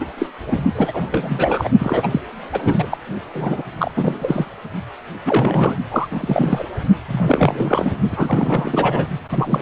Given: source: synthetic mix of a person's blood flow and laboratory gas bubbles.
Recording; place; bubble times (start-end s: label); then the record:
Doppler ultrasound of blood flow; precordium
0.00-0.06 s: bubbles
0.18-0.27 s: bubbles
0.46-0.61 s: bubbles
0.75-1.69 s: bubbles
1.78-2.08 s: bubbles
2.11-2.21 s: bubbles
2.52-2.97 s: bubbles
3.33-3.62 s: bubbles
3.77-3.91 s: bubbles
3.95-4.51 s: bubbles
5.25-5.77 s: bubbles
5.90-6.08 s: bubbles
6.11-6.65 s: bubbles
7.08-7.97 s: bubbles
8.10-9.08 s: bubbles
9.30-9.62 s: bubbles
From the record:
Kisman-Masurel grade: 342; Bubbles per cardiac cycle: rolling drumbeat, 9 or more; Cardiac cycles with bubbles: 100%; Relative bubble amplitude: moderate (0.250 to 0.450); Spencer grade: 3 (all of the cardiac periods contain showers or single bubble signals, but not dominating or overriding the cardiac motion signals); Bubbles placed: only in the low amplitude regions of the cardiac cycle